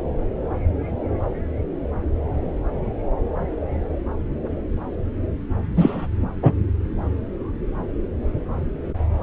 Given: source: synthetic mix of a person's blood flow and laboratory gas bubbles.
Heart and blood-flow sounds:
Doppler ultrasound of blood flow; subclavian vein
5.76-6.06 s: bubbles
6.42-6.53 s: bubbles
From the record:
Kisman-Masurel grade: 213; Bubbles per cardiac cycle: several, 3 to 8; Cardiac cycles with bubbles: 1 to 10%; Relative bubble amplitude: loud (0.450 to 0.775); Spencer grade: 1 (occasional bubble signal discernible with the cardiac motion signal, with majority of cardiac periods free of bubbles); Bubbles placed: anywhere in the cardiac cycle

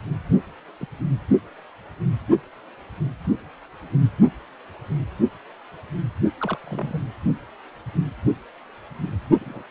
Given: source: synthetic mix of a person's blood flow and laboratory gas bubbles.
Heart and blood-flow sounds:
Doppler ultrasound of blood flow; precordium
0.80-0.85 s: bubbles
6.41-6.58 s: bubbles
6.64-7.02 s: bubbles
9.41-9.63 s: bubbles
From the record:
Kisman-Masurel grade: 121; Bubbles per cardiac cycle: 1 to 2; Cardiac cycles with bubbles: 10 to 50%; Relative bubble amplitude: barely perceptible (0.100 to 0.250); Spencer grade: 2 (many but less than half of the cardiac periods contain bubble signals, singularly or in groups); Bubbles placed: only in the low amplitude regions of the cardiac cycle

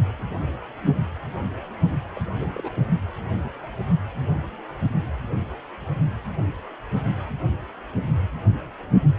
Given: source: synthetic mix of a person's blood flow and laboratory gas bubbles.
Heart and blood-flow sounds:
Doppler ultrasound of blood flow; precordium
2.16-2.19 s: bubbles
2.40-2.48 s: bubbles
2.54-2.70 s: bubbles
2.74-2.83 s: bubbles
From the record:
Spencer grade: 1 (occasional bubble signal discernible with the cardiac motion signal, with majority of cardiac periods free of bubbles); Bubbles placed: only in the low amplitude regions of the cardiac cycle

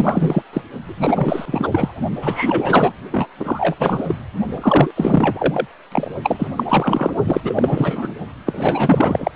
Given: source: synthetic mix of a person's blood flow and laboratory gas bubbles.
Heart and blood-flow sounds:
Doppler ultrasound of blood flow; precordium
0.00-0.43 s: bubbles
0.53-0.61 s: bubbles
0.84-2.00 s: bubbles
2.21-2.93 s: bubbles
3.11-3.27 s: bubbles
3.39-3.75 s: bubbles
3.79-4.15 s: bubbles
4.46-4.91 s: bubbles
4.96-5.66 s: bubbles
5.92-6.12 s: bubbles
6.22-6.48 s: bubbles
6.57-7.12 s: bubbles
7.24-8.13 s: bubbles
8.46-9.31 s: bubbles
From the record:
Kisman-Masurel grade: 444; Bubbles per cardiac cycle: continuous sound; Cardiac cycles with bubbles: 100%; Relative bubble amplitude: maximal (0.775 to 0.999); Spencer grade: 4 (maximum detectable bubble signal sounding continuously throughout systole and diastole of every cardiac period, and overriding the amplitude of the normal cardiac signals); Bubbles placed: only in the low amplitude regions of the cardiac cycle

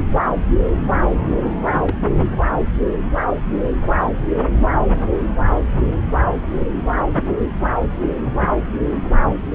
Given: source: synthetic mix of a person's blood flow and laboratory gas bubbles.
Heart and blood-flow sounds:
Doppler ultrasound of blood flow; subclavian vein
1.84-1.94 s: bubbles
From the record:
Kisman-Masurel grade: 111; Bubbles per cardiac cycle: 1 to 2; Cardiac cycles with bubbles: 1 to 10%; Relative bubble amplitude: barely perceptible (0.100 to 0.250); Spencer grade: 1 (occasional bubble signal discernible with the cardiac motion signal, with majority of cardiac periods free of bubbles); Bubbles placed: anywhere in the cardiac cycle

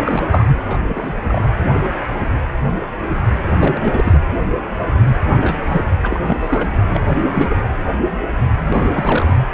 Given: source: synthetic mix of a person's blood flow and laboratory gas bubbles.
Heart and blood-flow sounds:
Doppler ultrasound of blood flow; precordium
0.00-0.46 s: bubbles
0.65-0.77 s: bubbles
0.88-1.47 s: bubbles
3.50-4.20 s: bubbles
5.40-5.84 s: bubbles
6.02-6.68 s: bubbles
6.93-7.07 s: bubbles
7.33-7.55 s: bubbles
8.59-9.39 s: bubbles
From the record:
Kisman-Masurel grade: 232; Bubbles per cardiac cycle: several, 3 to 8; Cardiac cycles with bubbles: 50 to 99%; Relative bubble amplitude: moderate (0.250 to 0.450); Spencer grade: 3 (all of the cardiac periods contain showers or single bubble signals, but not dominating or overriding the cardiac motion signals); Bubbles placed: anywhere in the cardiac cycle

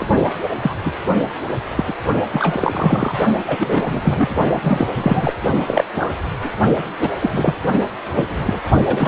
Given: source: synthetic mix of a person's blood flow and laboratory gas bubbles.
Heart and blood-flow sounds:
Doppler ultrasound of blood flow; precordium
0.00-0.06 s: bubbles
0.61-0.75 s: bubbles
0.85-0.93 s: bubbles
1.77-1.85 s: bubbles
1.87-1.93 s: bubbles
2.33-3.18 s: bubbles
3.47-4.29 s: bubbles
4.62-4.88 s: bubbles
4.95-5.35 s: bubbles
5.67-5.84 s: bubbles
5.96-6.12 s: bubbles
6.42-6.50 s: bubbles
6.99-7.10 s: bubbles
7.21-7.57 s: bubbles
8.15-8.24 s: bubbles
8.29-8.60 s: bubbles
8.86-9.08 s: bubbles
From the record:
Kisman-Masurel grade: 243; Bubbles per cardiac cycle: several, 3 to 8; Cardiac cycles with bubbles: 100%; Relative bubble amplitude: loud (0.450 to 0.775); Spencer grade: 3 (all of the cardiac periods contain showers or single bubble signals, but not dominating or overriding the cardiac motion signals); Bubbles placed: only in the low amplitude regions of the cardiac cycle

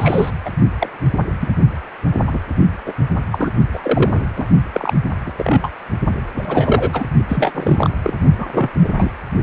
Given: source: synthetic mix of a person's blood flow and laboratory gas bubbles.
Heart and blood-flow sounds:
Doppler ultrasound of blood flow; precordium
0.00-0.31 s: bubbles
0.45-0.49 s: bubbles
0.78-0.89 s: bubbles
1.40-1.55 s: bubbles
2.27-2.39 s: bubbles
2.86-2.93 s: bubbles
3.31-3.51 s: bubbles
3.73-4.25 s: bubbles
4.37-4.45 s: bubbles
4.72-4.93 s: bubbles
5.26-5.33 s: bubbles
5.38-5.69 s: bubbles
6.37-7.04 s: bubbles
7.28-7.90 s: bubbles
8.04-8.13 s: bubbles
8.37-8.46 s: bubbles
8.52-8.70 s: bubbles
8.73-8.89 s: bubbles
8.96-9.11 s: bubbles
From the record:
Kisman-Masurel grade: 242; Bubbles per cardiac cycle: several, 3 to 8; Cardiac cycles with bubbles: 100%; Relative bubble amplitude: moderate (0.250 to 0.450); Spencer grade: 3 (all of the cardiac periods contain showers or single bubble signals, but not dominating or overriding the cardiac motion signals); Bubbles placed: only in the low amplitude regions of the cardiac cycle

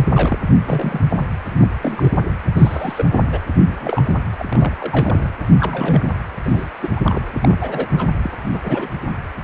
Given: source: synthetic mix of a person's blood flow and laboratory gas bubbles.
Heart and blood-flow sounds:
Doppler ultrasound of blood flow; precordium
0.11-0.39 s: bubbles
0.66-1.03 s: bubbles
1.09-1.26 s: bubbles
1.51-1.67 s: bubbles
1.82-2.09 s: bubbles
2.53-3.05 s: bubbles
3.12-3.26 s: bubbles
3.32-3.39 s: bubbles
3.66-4.15 s: bubbles
4.38-4.44 s: bubbles
4.50-4.72 s: bubbles
4.80-5.29 s: bubbles
5.58-6.13 s: bubbles
6.43-6.69 s: bubbles
6.81-6.89 s: bubbles
6.96-7.00 s: bubbles
7.04-7.21 s: bubbles
7.40-7.58 s: bubbles
7.60-7.88 s: bubbles
7.97-8.07 s: bubbles
8.23-8.30 s: bubbles
8.50-8.60 s: bubbles
8.63-8.88 s: bubbles
From the record:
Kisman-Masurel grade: 242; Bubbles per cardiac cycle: several, 3 to 8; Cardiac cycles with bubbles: 100%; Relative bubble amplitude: moderate (0.250 to 0.450); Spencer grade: 3 (all of the cardiac periods contain showers or single bubble signals, but not dominating or overriding the cardiac motion signals); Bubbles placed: anywhere in the cardiac cycle

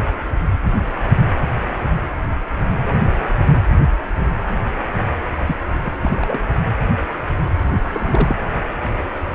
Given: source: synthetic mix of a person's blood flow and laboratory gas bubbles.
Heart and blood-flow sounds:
Doppler ultrasound of blood flow; precordium
5.46-5.55 s: bubbles
5.84-5.92 s: bubbles
6.03-6.38 s: bubbles
7.93-8.35 s: bubbles
From the record:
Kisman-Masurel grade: 222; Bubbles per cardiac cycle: several, 3 to 8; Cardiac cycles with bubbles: 10 to 50%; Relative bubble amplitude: moderate (0.250 to 0.450); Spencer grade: 2 (many but less than half of the cardiac periods contain bubble signals, singularly or in groups); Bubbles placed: anywhere in the cardiac cycle

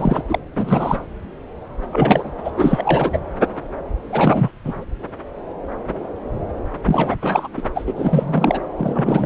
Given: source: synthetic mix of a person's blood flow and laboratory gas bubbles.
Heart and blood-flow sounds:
Doppler ultrasound of blood flow; subclavian vein
0.00-0.22 s: bubbles
0.29-0.39 s: bubbles
0.55-1.03 s: bubbles
1.93-2.32 s: bubbles
2.45-2.51 s: bubbles
2.57-3.18 s: bubbles
4.10-4.51 s: bubbles
4.64-4.85 s: bubbles
6.86-7.16 s: bubbles
7.21-7.48 s: bubbles
7.57-7.63 s: bubbles
7.75-8.60 s: bubbles
8.76-9.26 s: bubbles
From the record:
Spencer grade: 3 (all of the cardiac periods contain showers or single bubble signals, but not dominating or overriding the cardiac motion signals); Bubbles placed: anywhere in the cardiac cycle

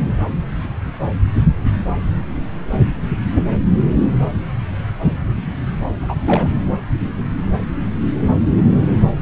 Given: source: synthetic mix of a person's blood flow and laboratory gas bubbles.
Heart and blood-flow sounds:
Doppler ultrasound of blood flow; subclavian vein
6.01-6.14 s: bubbles
6.24-6.51 s: bubbles
From the record:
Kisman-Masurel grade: 212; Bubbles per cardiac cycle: several, 3 to 8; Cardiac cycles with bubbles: 1 to 10%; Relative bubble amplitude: moderate (0.250 to 0.450); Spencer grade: 1 (occasional bubble signal discernible with the cardiac motion signal, with majority of cardiac periods free of bubbles); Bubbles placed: anywhere in the cardiac cycle

